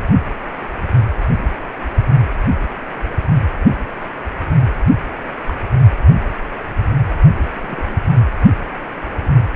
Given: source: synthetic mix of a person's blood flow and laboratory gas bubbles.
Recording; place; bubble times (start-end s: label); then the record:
Doppler ultrasound of blood flow; precordium
5.45-5.53 s: bubbles
7.47-8.02 s: bubbles
9.22-9.29 s: bubbles
From the record:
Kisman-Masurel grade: 121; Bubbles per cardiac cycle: 1 to 2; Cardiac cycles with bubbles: 10 to 50%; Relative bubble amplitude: barely perceptible (0.100 to 0.250); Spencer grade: 2 (many but less than half of the cardiac periods contain bubble signals, singularly or in groups); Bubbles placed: anywhere in the cardiac cycle